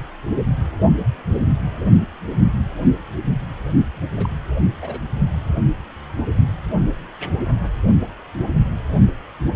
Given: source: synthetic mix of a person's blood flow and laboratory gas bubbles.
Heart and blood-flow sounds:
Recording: Doppler ultrasound of blood flow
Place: precordium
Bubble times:
4.16-4.29 s: bubbles
4.82-4.99 s: bubbles
From the record:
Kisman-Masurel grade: 211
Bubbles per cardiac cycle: several, 3 to 8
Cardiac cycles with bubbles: 1 to 10%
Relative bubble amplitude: barely perceptible (0.100 to 0.250)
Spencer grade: 1 (occasional bubble signal discernible with the cardiac motion signal, with majority of cardiac periods free of bubbles)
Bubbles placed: only in the low amplitude regions of the cardiac cycle

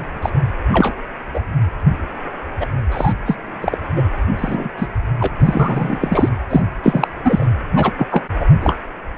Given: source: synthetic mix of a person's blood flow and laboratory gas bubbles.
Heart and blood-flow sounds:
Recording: Doppler ultrasound of blood flow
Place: precordium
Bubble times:
0.00-0.04 s: bubbles
0.22-0.29 s: bubbles
0.72-0.94 s: bubbles
1.33-1.41 s: bubbles
2.60-2.66 s: bubbles
2.92-3.12 s: bubbles
3.25-3.36 s: bubbles
3.60-3.78 s: bubbles
3.95-4.03 s: bubbles
4.37-4.69 s: bubbles
4.77-4.87 s: bubbles
5.20-5.28 s: bubbles
5.39-6.29 s: bubbles
6.50-6.62 s: bubbles
6.83-7.08 s: bubbles
7.25-7.46 s: bubbles
7.75-7.92 s: bubbles
7.98-8.06 s: bubbles
8.10-8.24 s: bubbles
8.39-8.46 s: bubbles
8.60-8.79 s: bubbles
From the record:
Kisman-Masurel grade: 243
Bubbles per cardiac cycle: several, 3 to 8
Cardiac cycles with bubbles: 100%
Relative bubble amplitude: loud (0.450 to 0.775)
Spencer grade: 3 (all of the cardiac periods contain showers or single bubble signals, but not dominating or overriding the cardiac motion signals)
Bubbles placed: anywhere in the cardiac cycle

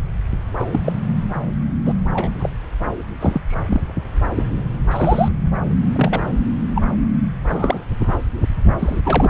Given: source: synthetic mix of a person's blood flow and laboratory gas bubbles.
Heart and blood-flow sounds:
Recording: Doppler ultrasound of blood flow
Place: subclavian vein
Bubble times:
0.59-0.66 s: bubbles
0.71-0.79 s: bubbles
0.84-0.93 s: bubbles
1.85-1.93 s: bubbles
2.13-2.32 s: bubbles
2.39-2.49 s: bubbles
3.20-3.42 s: bubbles
3.48-3.81 s: bubbles
4.35-4.44 s: bubbles
4.90-5.29 s: bubbles
5.95-6.23 s: bubbles
6.75-6.82 s: bubbles
7.43-7.84 s: bubbles
8.79-9.00 s: bubbles
9.04-9.30 s: bubbles
From the record:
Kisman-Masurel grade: 242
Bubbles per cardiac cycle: several, 3 to 8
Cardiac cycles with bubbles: 100%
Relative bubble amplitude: moderate (0.250 to 0.450)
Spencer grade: 3 (all of the cardiac periods contain showers or single bubble signals, but not dominating or overriding the cardiac motion signals)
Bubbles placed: anywhere in the cardiac cycle

